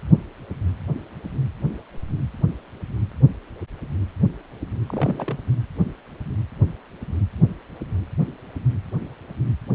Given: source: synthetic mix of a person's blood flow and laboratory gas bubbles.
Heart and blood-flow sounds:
Doppler ultrasound of blood flow; precordium
4.87-5.38 s: bubbles
From the record:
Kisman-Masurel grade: 211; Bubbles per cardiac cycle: several, 3 to 8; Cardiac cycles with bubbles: 1 to 10%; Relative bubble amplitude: barely perceptible (0.100 to 0.250); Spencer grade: 1 (occasional bubble signal discernible with the cardiac motion signal, with majority of cardiac periods free of bubbles); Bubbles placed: anywhere in the cardiac cycle

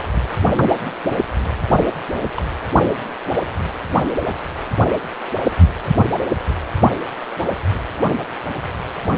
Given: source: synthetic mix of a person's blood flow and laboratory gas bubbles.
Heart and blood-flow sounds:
Doppler ultrasound of blood flow; precordium
2.12-2.18 s: bubbles
2.24-2.32 s: bubbles
2.37-2.42 s: bubbles
2.54-2.62 s: bubbles
From the record:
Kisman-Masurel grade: 211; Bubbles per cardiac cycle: several, 3 to 8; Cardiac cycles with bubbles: 1 to 10%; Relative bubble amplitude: barely perceptible (0.100 to 0.250); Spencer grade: 1 (occasional bubble signal discernible with the cardiac motion signal, with majority of cardiac periods free of bubbles); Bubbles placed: only in the low amplitude regions of the cardiac cycle

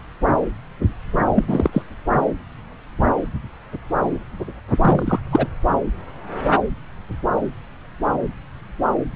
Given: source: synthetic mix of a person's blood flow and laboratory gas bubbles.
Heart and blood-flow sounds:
Doppler ultrasound of blood flow; subclavian vein
1.34-1.45 s: bubbles
1.48-1.70 s: bubbles
1.72-1.82 s: bubbles
4.81-5.19 s: bubbles
5.31-5.47 s: bubbles
From the record:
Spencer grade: 2 (many but less than half of the cardiac periods contain bubble signals, singularly or in groups); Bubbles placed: anywhere in the cardiac cycle

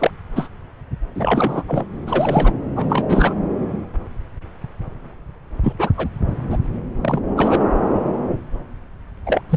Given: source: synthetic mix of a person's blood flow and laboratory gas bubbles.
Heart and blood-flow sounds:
Doppler ultrasound of blood flow; subclavian vein
0.00-0.11 s: bubbles
0.35-0.48 s: bubbles
1.15-1.62 s: bubbles
1.68-1.85 s: bubbles
2.06-2.53 s: bubbles
2.75-3.34 s: bubbles
5.63-5.72 s: bubbles
5.79-5.90 s: bubbles
5.97-6.08 s: bubbles
6.50-6.58 s: bubbles
7.01-7.21 s: bubbles
7.37-7.64 s: bubbles
9.26-9.42 s: bubbles
9.49-9.57 s: bubbles
From the record:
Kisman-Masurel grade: 233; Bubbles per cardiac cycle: several, 3 to 8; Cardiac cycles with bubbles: 50 to 99%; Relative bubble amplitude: loud (0.450 to 0.775); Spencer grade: 3 (all of the cardiac periods contain showers or single bubble signals, but not dominating or overriding the cardiac motion signals); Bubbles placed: anywhere in the cardiac cycle

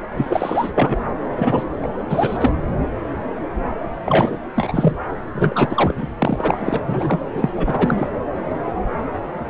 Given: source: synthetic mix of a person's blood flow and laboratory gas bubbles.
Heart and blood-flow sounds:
Doppler ultrasound of blood flow; subclavian vein
0.14-0.71 s: bubbles
0.75-1.01 s: bubbles
1.36-1.65 s: bubbles
1.82-1.88 s: bubbles
2.10-2.50 s: bubbles
4.06-4.38 s: bubbles
4.55-4.92 s: bubbles
5.34-5.94 s: bubbles
5.97-6.07 s: bubbles
6.19-6.80 s: bubbles
6.84-7.21 s: bubbles
7.33-7.50 s: bubbles
7.57-8.10 s: bubbles
From the record:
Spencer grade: 3 (all of the cardiac periods contain showers or single bubble signals, but not dominating or overriding the cardiac motion signals); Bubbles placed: anywhere in the cardiac cycle

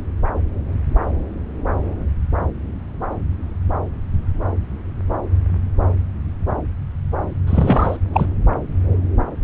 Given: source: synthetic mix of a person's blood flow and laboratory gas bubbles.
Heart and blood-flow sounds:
Doppler ultrasound of blood flow; subclavian vein
7.47-7.97 s: bubbles
8.13-8.26 s: bubbles
From the record:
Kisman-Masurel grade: 212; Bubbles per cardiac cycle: several, 3 to 8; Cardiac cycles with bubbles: 1 to 10%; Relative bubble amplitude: moderate (0.250 to 0.450); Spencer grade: 1 (occasional bubble signal discernible with the cardiac motion signal, with majority of cardiac periods free of bubbles); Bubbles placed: anywhere in the cardiac cycle

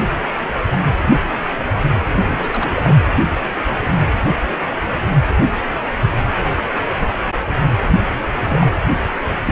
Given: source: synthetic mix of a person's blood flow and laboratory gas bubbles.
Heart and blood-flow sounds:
Doppler ultrasound of blood flow; precordium
2.16-2.96 s: bubbles
8.44-8.71 s: bubbles
9.46-9.52 s: bubbles
From the record:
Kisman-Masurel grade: 222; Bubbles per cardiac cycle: several, 3 to 8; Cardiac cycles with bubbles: 10 to 50%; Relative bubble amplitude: moderate (0.250 to 0.450); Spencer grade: 2 (many but less than half of the cardiac periods contain bubble signals, singularly or in groups); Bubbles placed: anywhere in the cardiac cycle

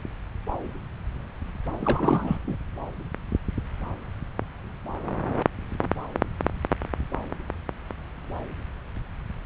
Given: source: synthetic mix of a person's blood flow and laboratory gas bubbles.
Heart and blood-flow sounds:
Doppler ultrasound of blood flow; subclavian vein
1.81-2.38 s: bubbles
2.47-2.56 s: bubbles
From the record:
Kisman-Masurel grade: 212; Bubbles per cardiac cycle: several, 3 to 8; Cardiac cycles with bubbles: 1 to 10%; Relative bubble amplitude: moderate (0.250 to 0.450); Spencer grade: 1 (occasional bubble signal discernible with the cardiac motion signal, with majority of cardiac periods free of bubbles); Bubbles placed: anywhere in the cardiac cycle

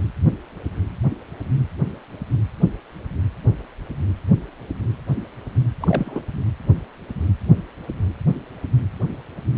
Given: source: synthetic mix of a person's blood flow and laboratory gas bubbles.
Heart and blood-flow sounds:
Doppler ultrasound of blood flow; precordium
5.80-6.22 s: bubbles
From the record:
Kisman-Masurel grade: 112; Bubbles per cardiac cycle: 1 to 2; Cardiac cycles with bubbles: 1 to 10%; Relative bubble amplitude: moderate (0.250 to 0.450); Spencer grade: 1 (occasional bubble signal discernible with the cardiac motion signal, with majority of cardiac periods free of bubbles); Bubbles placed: anywhere in the cardiac cycle

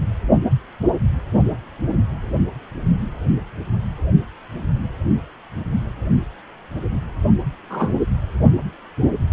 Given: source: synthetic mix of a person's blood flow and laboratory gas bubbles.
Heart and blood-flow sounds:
Doppler ultrasound of blood flow; precordium
7.70-7.90 s: bubbles
From the record:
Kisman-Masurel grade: 113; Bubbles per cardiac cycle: 1 to 2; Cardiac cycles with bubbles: 1 to 10%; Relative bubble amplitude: loud (0.450 to 0.775); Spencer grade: 1 (occasional bubble signal discernible with the cardiac motion signal, with majority of cardiac periods free of bubbles); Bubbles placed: anywhere in the cardiac cycle

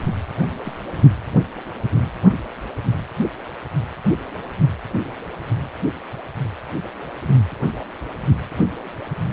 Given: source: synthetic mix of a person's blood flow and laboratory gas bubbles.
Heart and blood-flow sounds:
Doppler ultrasound of blood flow; precordium
0.40-0.52 s: bubbles
0.65-0.78 s: bubbles
From the record:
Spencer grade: 1 (occasional bubble signal discernible with the cardiac motion signal, with majority of cardiac periods free of bubbles); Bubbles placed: anywhere in the cardiac cycle

